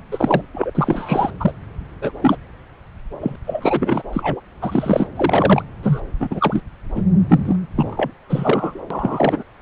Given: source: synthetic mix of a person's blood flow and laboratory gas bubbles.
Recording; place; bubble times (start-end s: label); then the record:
Doppler ultrasound of blood flow; subclavian vein
0.11-0.42 s: bubbles
0.53-0.71 s: bubbles
0.74-1.30 s: bubbles
1.40-1.51 s: bubbles
2.01-2.12 s: bubbles
2.21-2.38 s: bubbles
3.20-3.36 s: bubbles
3.47-4.03 s: bubbles
4.12-4.41 s: bubbles
4.62-5.08 s: bubbles
5.16-5.62 s: bubbles
5.83-6.01 s: bubbles
6.20-6.61 s: bubbles
6.95-7.03 s: bubbles
7.28-7.56 s: bubbles
7.75-8.12 s: bubbles
8.29-8.80 s: bubbles
8.90-9.43 s: bubbles
From the record:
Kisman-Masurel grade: 343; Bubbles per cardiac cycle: rolling drumbeat, 9 or more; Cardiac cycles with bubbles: 100%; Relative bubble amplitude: loud (0.450 to 0.775); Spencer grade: 3 (all of the cardiac periods contain showers or single bubble signals, but not dominating or overriding the cardiac motion signals); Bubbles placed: anywhere in the cardiac cycle